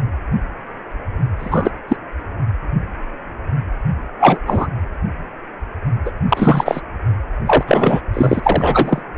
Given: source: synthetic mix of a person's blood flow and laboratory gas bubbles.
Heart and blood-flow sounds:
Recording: Doppler ultrasound of blood flow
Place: precordium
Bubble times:
1.39-1.71 s: bubbles
1.88-1.96 s: bubbles
4.19-4.38 s: bubbles
4.46-4.67 s: bubbles
6.05-6.11 s: bubbles
6.29-6.81 s: bubbles
7.46-7.63 s: bubbles
7.66-8.01 s: bubbles
8.13-9.01 s: bubbles
From the record:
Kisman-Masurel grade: 233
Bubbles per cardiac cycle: several, 3 to 8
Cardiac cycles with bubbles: 50 to 99%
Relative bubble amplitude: loud (0.450 to 0.775)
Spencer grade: 3 (all of the cardiac periods contain showers or single bubble signals, but not dominating or overriding the cardiac motion signals)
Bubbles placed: anywhere in the cardiac cycle

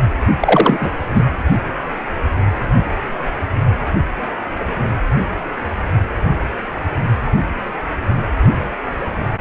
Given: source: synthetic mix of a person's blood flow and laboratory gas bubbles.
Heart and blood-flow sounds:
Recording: Doppler ultrasound of blood flow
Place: precordium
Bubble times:
0.40-0.90 s: bubbles
1.15-1.25 s: bubbles
From the record:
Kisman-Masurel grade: 223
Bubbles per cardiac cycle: several, 3 to 8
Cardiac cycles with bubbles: 10 to 50%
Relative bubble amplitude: loud (0.450 to 0.775)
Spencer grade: 2 (many but less than half of the cardiac periods contain bubble signals, singularly or in groups)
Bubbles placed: only in the low amplitude regions of the cardiac cycle

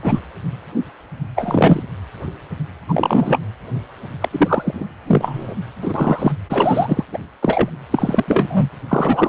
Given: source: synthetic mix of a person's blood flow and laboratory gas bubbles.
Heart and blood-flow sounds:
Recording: Doppler ultrasound of blood flow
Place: precordium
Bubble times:
0.02-0.19 s: bubbles
1.35-1.82 s: bubbles
2.88-3.40 s: bubbles
4.21-4.29 s: bubbles
4.31-4.85 s: bubbles
5.06-5.54 s: bubbles
5.81-6.32 s: bubbles
6.49-7.04 s: bubbles
7.12-7.17 s: bubbles
7.42-7.71 s: bubbles
7.91-8.25 s: bubbles
8.27-8.69 s: bubbles
8.88-9.29 s: bubbles
From the record:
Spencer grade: 3 (all of the cardiac periods contain showers or single bubble signals, but not dominating or overriding the cardiac motion signals)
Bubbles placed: anywhere in the cardiac cycle

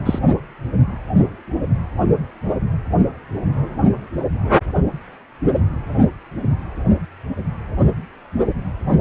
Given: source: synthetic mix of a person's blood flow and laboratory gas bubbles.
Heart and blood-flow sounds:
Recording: Doppler ultrasound of blood flow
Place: precordium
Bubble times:
0.06-0.19 s: bubbles
From the record:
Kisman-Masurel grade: 113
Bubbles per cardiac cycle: 1 to 2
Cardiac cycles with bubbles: 1 to 10%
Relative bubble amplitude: loud (0.450 to 0.775)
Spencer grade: 1 (occasional bubble signal discernible with the cardiac motion signal, with majority of cardiac periods free of bubbles)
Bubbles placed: only in the low amplitude regions of the cardiac cycle

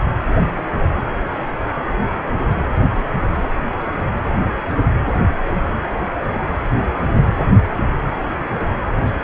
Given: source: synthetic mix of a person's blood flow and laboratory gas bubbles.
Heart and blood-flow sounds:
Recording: Doppler ultrasound of blood flow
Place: precordium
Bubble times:
no bubbles
From the record:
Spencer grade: 0 (complete lack of bubble signals)

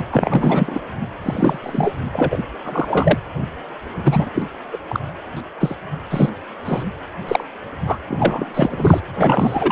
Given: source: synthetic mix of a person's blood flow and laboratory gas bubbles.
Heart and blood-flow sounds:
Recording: Doppler ultrasound of blood flow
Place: precordium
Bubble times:
0.11-0.80 s: bubbles
1.23-1.58 s: bubbles
1.62-1.93 s: bubbles
2.13-2.43 s: bubbles
2.65-3.18 s: bubbles
4.04-4.29 s: bubbles
4.34-4.42 s: bubbles
4.72-4.79 s: bubbles
4.88-5.00 s: bubbles
5.37-5.41 s: bubbles
5.60-5.75 s: bubbles
6.10-6.29 s: bubbles
6.65-6.91 s: bubbles
7.28-7.44 s: bubbles
7.86-7.97 s: bubbles
8.08-8.46 s: bubbles
8.54-9.01 s: bubbles
9.15-9.71 s: bubbles
From the record:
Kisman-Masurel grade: 243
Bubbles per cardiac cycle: several, 3 to 8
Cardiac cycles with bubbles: 100%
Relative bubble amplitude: loud (0.450 to 0.775)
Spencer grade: 3 (all of the cardiac periods contain showers or single bubble signals, but not dominating or overriding the cardiac motion signals)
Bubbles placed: anywhere in the cardiac cycle

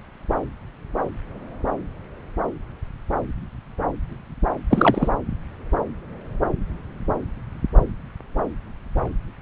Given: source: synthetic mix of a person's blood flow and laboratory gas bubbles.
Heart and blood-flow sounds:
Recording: Doppler ultrasound of blood flow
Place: subclavian vein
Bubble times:
4.70-5.08 s: bubbles
From the record:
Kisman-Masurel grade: 213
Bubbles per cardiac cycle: several, 3 to 8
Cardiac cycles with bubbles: 1 to 10%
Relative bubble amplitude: loud (0.450 to 0.775)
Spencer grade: 1 (occasional bubble signal discernible with the cardiac motion signal, with majority of cardiac periods free of bubbles)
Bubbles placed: anywhere in the cardiac cycle

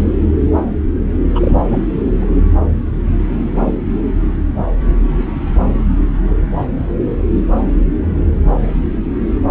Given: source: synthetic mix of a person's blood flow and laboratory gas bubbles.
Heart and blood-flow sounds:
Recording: Doppler ultrasound of blood flow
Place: subclavian vein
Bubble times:
1.34-1.52 s: bubbles
1.73-1.77 s: bubbles
2.20-2.28 s: bubbles
From the record:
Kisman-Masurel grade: 212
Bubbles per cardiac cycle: several, 3 to 8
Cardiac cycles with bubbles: 1 to 10%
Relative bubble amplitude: moderate (0.250 to 0.450)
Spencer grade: 1 (occasional bubble signal discernible with the cardiac motion signal, with majority of cardiac periods free of bubbles)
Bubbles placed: anywhere in the cardiac cycle

